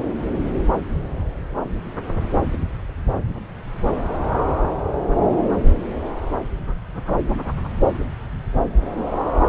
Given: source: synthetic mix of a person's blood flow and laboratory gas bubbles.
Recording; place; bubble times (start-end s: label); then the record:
Doppler ultrasound of blood flow; subclavian vein
no bubbles
From the record:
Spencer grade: 0 (complete lack of bubble signals)